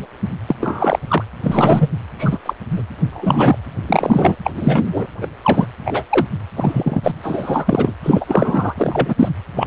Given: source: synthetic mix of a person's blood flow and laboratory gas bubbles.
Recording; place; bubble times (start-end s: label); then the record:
Doppler ultrasound of blood flow; precordium
0.00-0.07 s: bubbles
0.47-0.55 s: bubbles
0.60-0.99 s: bubbles
1.07-1.24 s: bubbles
1.43-1.89 s: bubbles
2.18-2.39 s: bubbles
2.46-2.54 s: bubbles
2.71-2.83 s: bubbles
3.10-3.58 s: bubbles
3.87-4.36 s: bubbles
4.45-4.51 s: bubbles
4.55-5.06 s: bubbles
5.21-5.27 s: bubbles
5.42-5.66 s: bubbles
5.84-6.02 s: bubbles
6.09-6.26 s: bubbles
6.56-7.00 s: bubbles
7.03-7.11 s: bubbles
7.22-7.94 s: bubbles
8.03-8.24 s: bubbles
8.28-8.74 s: bubbles
8.77-9.14 s: bubbles
9.19-9.29 s: bubbles
9.54-9.67 s: bubbles
From the record:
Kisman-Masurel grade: 243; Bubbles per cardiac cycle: several, 3 to 8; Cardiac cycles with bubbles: 100%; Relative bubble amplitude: loud (0.450 to 0.775); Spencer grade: 3 (all of the cardiac periods contain showers or single bubble signals, but not dominating or overriding the cardiac motion signals); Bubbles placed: anywhere in the cardiac cycle